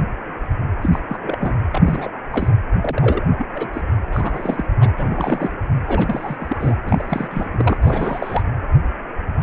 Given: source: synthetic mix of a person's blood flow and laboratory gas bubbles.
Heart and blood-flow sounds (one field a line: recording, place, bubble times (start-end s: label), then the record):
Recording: Doppler ultrasound of blood flow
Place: precordium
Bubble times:
0.82-0.99 s: bubbles
1.07-1.19 s: bubbles
1.22-1.37 s: bubbles
1.40-1.57 s: bubbles
1.72-2.10 s: bubbles
2.31-2.48 s: bubbles
2.81-3.25 s: bubbles
3.32-3.46 s: bubbles
3.54-3.68 s: bubbles
3.73-3.81 s: bubbles
4.12-4.66 s: bubbles
4.80-4.92 s: bubbles
4.97-5.54 s: bubbles
5.87-6.37 s: bubbles
6.40-6.76 s: bubbles
6.86-7.49 s: bubbles
7.53-7.77 s: bubbles
7.82-8.43 s: bubbles
From the record:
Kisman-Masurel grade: 332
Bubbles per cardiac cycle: rolling drumbeat, 9 or more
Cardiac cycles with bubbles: 50 to 99%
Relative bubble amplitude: moderate (0.250 to 0.450)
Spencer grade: 3 (all of the cardiac periods contain showers or single bubble signals, but not dominating or overriding the cardiac motion signals)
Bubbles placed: anywhere in the cardiac cycle